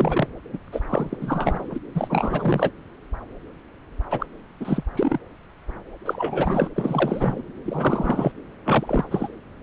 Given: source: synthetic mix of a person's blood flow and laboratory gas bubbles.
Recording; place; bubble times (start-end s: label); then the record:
Doppler ultrasound of blood flow; subclavian vein
0.00-0.27 s: bubbles
0.53-0.57 s: bubbles
0.72-0.80 s: bubbles
0.88-1.17 s: bubbles
1.21-1.78 s: bubbles
1.94-2.71 s: bubbles
4.10-4.26 s: bubbles
4.60-4.83 s: bubbles
4.96-5.18 s: bubbles
6.05-6.69 s: bubbles
6.76-7.42 s: bubbles
7.64-8.32 s: bubbles
8.65-9.05 s: bubbles
9.11-9.28 s: bubbles
From the record:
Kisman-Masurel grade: 332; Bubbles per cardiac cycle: rolling drumbeat, 9 or more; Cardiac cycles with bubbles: 50 to 99%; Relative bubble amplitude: moderate (0.250 to 0.450); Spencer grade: 3 (all of the cardiac periods contain showers or single bubble signals, but not dominating or overriding the cardiac motion signals); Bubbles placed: anywhere in the cardiac cycle